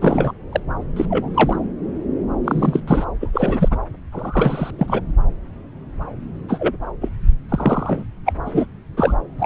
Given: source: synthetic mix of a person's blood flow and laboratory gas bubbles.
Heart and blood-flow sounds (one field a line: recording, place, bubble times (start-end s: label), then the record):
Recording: Doppler ultrasound of blood flow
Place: subclavian vein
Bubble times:
0.00-0.32 s: bubbles
0.52-0.60 s: bubbles
0.96-1.05 s: bubbles
1.09-1.29 s: bubbles
1.34-1.56 s: bubbles
2.44-2.80 s: bubbles
2.87-3.05 s: bubbles
3.21-3.78 s: bubbles
4.12-4.71 s: bubbles
4.78-5.01 s: bubbles
6.48-6.75 s: bubbles
7.01-7.08 s: bubbles
7.49-8.05 s: bubbles
8.25-8.33 s: bubbles
8.46-8.66 s: bubbles
8.97-9.16 s: bubbles
9.38-9.46 s: bubbles
From the record:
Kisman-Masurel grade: 233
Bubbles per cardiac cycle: several, 3 to 8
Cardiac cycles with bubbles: 50 to 99%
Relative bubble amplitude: loud (0.450 to 0.775)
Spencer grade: 3 (all of the cardiac periods contain showers or single bubble signals, but not dominating or overriding the cardiac motion signals)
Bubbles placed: anywhere in the cardiac cycle